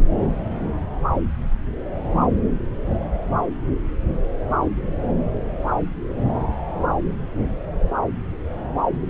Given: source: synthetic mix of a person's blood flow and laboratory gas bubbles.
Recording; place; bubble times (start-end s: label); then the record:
Doppler ultrasound of blood flow; subclavian vein
no bubbles
From the record:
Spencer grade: 0 (complete lack of bubble signals)